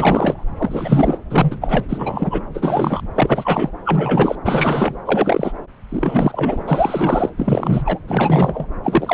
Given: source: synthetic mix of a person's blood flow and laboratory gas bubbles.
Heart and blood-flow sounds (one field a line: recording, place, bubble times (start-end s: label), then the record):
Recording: Doppler ultrasound of blood flow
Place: subclavian vein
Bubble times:
0.00-0.44 s: bubbles
0.58-1.18 s: bubbles
1.30-1.85 s: bubbles
1.89-2.43 s: bubbles
2.54-3.01 s: bubbles
3.15-3.71 s: bubbles
3.85-4.35 s: bubbles
4.44-4.96 s: bubbles
5.05-5.52 s: bubbles
5.89-7.29 s: bubbles
7.38-7.98 s: bubbles
8.07-8.67 s: bubbles
8.83-9.14 s: bubbles
From the record:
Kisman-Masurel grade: 342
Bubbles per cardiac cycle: rolling drumbeat, 9 or more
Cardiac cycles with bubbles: 100%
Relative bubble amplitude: moderate (0.250 to 0.450)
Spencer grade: 3 (all of the cardiac periods contain showers or single bubble signals, but not dominating or overriding the cardiac motion signals)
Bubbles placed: anywhere in the cardiac cycle